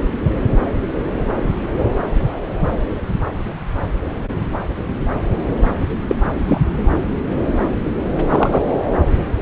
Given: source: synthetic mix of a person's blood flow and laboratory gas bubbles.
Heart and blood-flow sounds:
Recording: Doppler ultrasound of blood flow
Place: subclavian vein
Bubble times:
6.08-6.16 s: bubbles
6.47-6.61 s: bubbles
8.28-8.79 s: bubbles
From the record:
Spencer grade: 2 (many but less than half of the cardiac periods contain bubble signals, singularly or in groups)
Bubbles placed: anywhere in the cardiac cycle

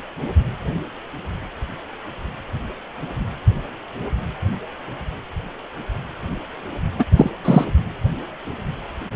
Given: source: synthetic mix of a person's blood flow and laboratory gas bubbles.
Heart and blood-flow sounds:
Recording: Doppler ultrasound of blood flow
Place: precordium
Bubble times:
6.99-7.05 s: bubbles
7.16-7.30 s: bubbles
7.45-7.65 s: bubbles
From the record:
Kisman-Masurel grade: 213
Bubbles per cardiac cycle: several, 3 to 8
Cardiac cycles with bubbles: 1 to 10%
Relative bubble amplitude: loud (0.450 to 0.775)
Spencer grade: 1 (occasional bubble signal discernible with the cardiac motion signal, with majority of cardiac periods free of bubbles)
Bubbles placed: anywhere in the cardiac cycle

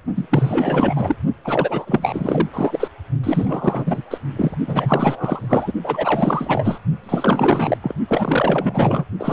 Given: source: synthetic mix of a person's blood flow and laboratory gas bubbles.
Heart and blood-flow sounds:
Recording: Doppler ultrasound of blood flow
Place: precordium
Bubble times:
0.15-0.28 s: bubbles
0.30-1.16 s: bubbles
1.44-2.49 s: bubbles
2.53-2.88 s: bubbles
3.23-4.02 s: bubbles
4.10-4.18 s: bubbles
4.36-4.55 s: bubbles
4.67-5.73 s: bubbles
5.83-6.79 s: bubbles
7.03-7.78 s: bubbles
7.82-7.95 s: bubbles
8.08-9.05 s: bubbles
9.19-9.33 s: bubbles
From the record:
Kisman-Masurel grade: 444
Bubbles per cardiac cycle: continuous sound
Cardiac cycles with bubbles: 100%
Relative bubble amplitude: maximal (0.775 to 0.999)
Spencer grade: 4 (maximum detectable bubble signal sounding continuously throughout systole and diastole of every cardiac period, and overriding the amplitude of the normal cardiac signals)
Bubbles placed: only in the low amplitude regions of the cardiac cycle

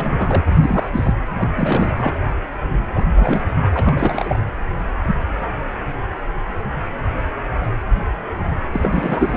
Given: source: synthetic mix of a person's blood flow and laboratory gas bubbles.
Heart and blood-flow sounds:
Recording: Doppler ultrasound of blood flow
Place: precordium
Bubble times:
0.00-0.42 s: bubbles
0.53-1.14 s: bubbles
1.38-1.49 s: bubbles
1.56-1.94 s: bubbles
1.97-2.15 s: bubbles
2.94-3.05 s: bubbles
3.16-3.44 s: bubbles
3.74-4.38 s: bubbles
8.72-9.37 s: bubbles
From the record:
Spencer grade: 3 (all of the cardiac periods contain showers or single bubble signals, but not dominating or overriding the cardiac motion signals)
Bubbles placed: anywhere in the cardiac cycle

